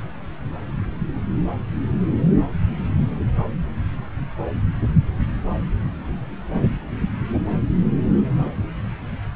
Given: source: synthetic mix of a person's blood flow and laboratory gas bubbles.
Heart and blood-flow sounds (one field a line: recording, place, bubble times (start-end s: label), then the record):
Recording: Doppler ultrasound of blood flow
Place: subclavian vein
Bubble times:
no bubbles
From the record:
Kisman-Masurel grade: 000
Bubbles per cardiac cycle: 0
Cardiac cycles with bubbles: 0%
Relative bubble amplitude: no bubbles discernible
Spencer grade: 0 (complete lack of bubble signals)